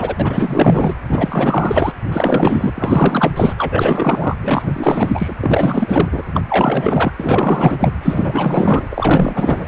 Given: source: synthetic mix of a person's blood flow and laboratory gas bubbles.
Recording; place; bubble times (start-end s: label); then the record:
Doppler ultrasound of blood flow; precordium
0.00-0.15 s: bubbles
0.19-0.95 s: bubbles
1.09-1.92 s: bubbles
2.07-3.53 s: bubbles
3.57-4.35 s: bubbles
4.43-5.34 s: bubbles
5.41-6.08 s: bubbles
6.12-6.23 s: bubbles
6.33-6.42 s: bubbles
6.47-7.12 s: bubbles
7.19-7.95 s: bubbles
8.02-8.88 s: bubbles
8.91-9.67 s: bubbles
From the record:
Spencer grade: 4 (maximum detectable bubble signal sounding continuously throughout systole and diastole of every cardiac period, and overriding the amplitude of the normal cardiac signals); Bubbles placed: anywhere in the cardiac cycle